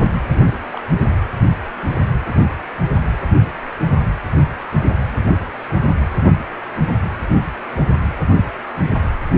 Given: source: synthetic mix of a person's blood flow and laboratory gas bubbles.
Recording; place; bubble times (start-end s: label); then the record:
Doppler ultrasound of blood flow; precordium
0.02-0.10 s: bubbles
0.29-0.41 s: bubbles
0.46-0.53 s: bubbles
0.72-0.84 s: bubbles
From the record:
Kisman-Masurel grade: 221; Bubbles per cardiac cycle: several, 3 to 8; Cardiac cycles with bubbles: 10 to 50%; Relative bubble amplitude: barely perceptible (0.100 to 0.250); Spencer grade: 2 (many but less than half of the cardiac periods contain bubble signals, singularly or in groups); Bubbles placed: anywhere in the cardiac cycle